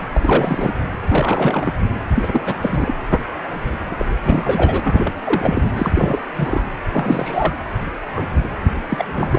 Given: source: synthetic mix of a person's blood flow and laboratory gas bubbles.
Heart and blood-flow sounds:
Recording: Doppler ultrasound of blood flow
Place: precordium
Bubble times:
0.13-0.74 s: bubbles
1.08-1.73 s: bubbles
2.10-2.30 s: bubbles
2.33-2.42 s: bubbles
2.45-2.95 s: bubbles
3.91-3.95 s: bubbles
3.98-4.05 s: bubbles
4.24-4.80 s: bubbles
4.84-5.13 s: bubbles
5.24-5.62 s: bubbles
5.75-6.21 s: bubbles
6.34-6.62 s: bubbles
6.92-7.55 s: bubbles
8.12-8.30 s: bubbles
8.43-8.48 s: bubbles
8.89-9.39 s: bubbles
From the record:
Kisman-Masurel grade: 332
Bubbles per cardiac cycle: rolling drumbeat, 9 or more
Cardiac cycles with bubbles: 50 to 99%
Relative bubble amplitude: moderate (0.250 to 0.450)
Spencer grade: 3 (all of the cardiac periods contain showers or single bubble signals, but not dominating or overriding the cardiac motion signals)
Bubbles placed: anywhere in the cardiac cycle

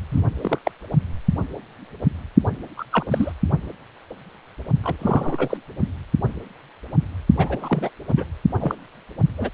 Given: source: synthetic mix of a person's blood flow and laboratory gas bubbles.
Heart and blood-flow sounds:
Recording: Doppler ultrasound of blood flow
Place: precordium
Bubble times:
0.11-0.21 s: bubbles
0.41-0.58 s: bubbles
0.65-0.71 s: bubbles
2.77-2.84 s: bubbles
2.92-3.05 s: bubbles
3.10-3.32 s: bubbles
4.83-4.96 s: bubbles
4.99-5.58 s: bubbles
7.37-7.90 s: bubbles
8.08-8.25 s: bubbles
8.60-8.75 s: bubbles
9.38-9.50 s: bubbles
From the record:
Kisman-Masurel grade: 232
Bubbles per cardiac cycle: several, 3 to 8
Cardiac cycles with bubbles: 50 to 99%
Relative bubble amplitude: moderate (0.250 to 0.450)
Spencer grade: 3 (all of the cardiac periods contain showers or single bubble signals, but not dominating or overriding the cardiac motion signals)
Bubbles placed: only in the low amplitude regions of the cardiac cycle

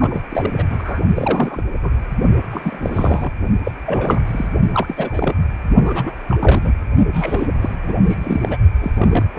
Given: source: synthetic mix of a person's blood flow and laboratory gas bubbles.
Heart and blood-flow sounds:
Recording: Doppler ultrasound of blood flow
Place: precordium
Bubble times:
0.00-0.21 s: bubbles
0.29-0.51 s: bubbles
0.58-0.64 s: bubbles
0.70-1.01 s: bubbles
1.16-1.62 s: bubbles
1.82-2.08 s: bubbles
2.50-3.30 s: bubbles
3.65-3.71 s: bubbles
3.86-4.20 s: bubbles
4.27-4.49 s: bubbles
4.74-5.35 s: bubbles
5.83-6.12 s: bubbles
6.29-6.83 s: bubbles
7.14-7.47 s: bubbles
7.61-7.75 s: bubbles
7.87-7.96 s: bubbles
8.06-8.56 s: bubbles
8.81-8.92 s: bubbles
8.97-9.26 s: bubbles
9.35-9.39 s: bubbles
From the record:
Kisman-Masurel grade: 342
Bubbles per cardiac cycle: rolling drumbeat, 9 or more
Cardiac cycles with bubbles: 100%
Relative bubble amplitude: moderate (0.250 to 0.450)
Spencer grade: 3 (all of the cardiac periods contain showers or single bubble signals, but not dominating or overriding the cardiac motion signals)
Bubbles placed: only in the low amplitude regions of the cardiac cycle

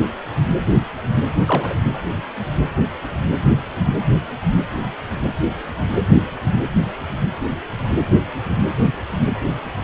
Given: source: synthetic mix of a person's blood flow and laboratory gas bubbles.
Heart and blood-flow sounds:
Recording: Doppler ultrasound of blood flow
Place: precordium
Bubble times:
1.46-1.74 s: bubbles
From the record:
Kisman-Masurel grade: 212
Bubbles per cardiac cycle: several, 3 to 8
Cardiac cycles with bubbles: 1 to 10%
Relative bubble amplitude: moderate (0.250 to 0.450)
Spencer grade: 1 (occasional bubble signal discernible with the cardiac motion signal, with majority of cardiac periods free of bubbles)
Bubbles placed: anywhere in the cardiac cycle

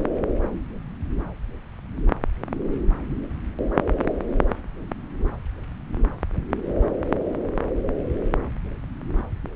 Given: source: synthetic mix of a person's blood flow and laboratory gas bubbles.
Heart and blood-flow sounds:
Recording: Doppler ultrasound of blood flow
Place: subclavian vein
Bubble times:
no bubbles
From the record:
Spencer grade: 0 (complete lack of bubble signals)

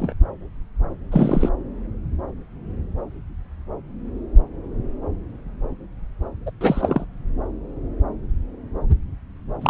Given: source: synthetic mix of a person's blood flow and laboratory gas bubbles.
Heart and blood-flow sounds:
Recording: Doppler ultrasound of blood flow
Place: subclavian vein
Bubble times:
0.00-0.13 s: bubbles
1.11-1.49 s: bubbles
6.46-6.50 s: bubbles
6.60-7.05 s: bubbles
9.61-9.70 s: bubbles
From the record:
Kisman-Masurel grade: 222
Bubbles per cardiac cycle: several, 3 to 8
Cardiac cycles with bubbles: 10 to 50%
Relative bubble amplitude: moderate (0.250 to 0.450)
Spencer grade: 2 (many but less than half of the cardiac periods contain bubble signals, singularly or in groups)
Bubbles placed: anywhere in the cardiac cycle

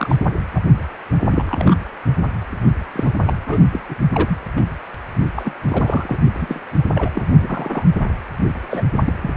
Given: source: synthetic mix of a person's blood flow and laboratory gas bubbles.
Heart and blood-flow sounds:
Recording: Doppler ultrasound of blood flow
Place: precordium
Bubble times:
0.00-0.16 s: bubbles
0.55-0.60 s: bubbles
1.30-1.75 s: bubbles
2.93-3.12 s: bubbles
3.25-3.33 s: bubbles
3.46-3.58 s: bubbles
3.71-3.80 s: bubbles
3.89-3.95 s: bubbles
4.12-4.38 s: bubbles
4.57-4.64 s: bubbles
5.36-5.54 s: bubbles
5.69-6.19 s: bubbles
6.33-6.62 s: bubbles
6.94-7.10 s: bubbles
7.14-7.23 s: bubbles
7.41-7.85 s: bubbles
8.71-8.82 s: bubbles
9.04-9.12 s: bubbles
9.22-9.31 s: bubbles
From the record:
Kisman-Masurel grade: 232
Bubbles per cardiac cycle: several, 3 to 8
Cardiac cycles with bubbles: 50 to 99%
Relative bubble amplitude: moderate (0.250 to 0.450)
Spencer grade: 3 (all of the cardiac periods contain showers or single bubble signals, but not dominating or overriding the cardiac motion signals)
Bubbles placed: only in the low amplitude regions of the cardiac cycle

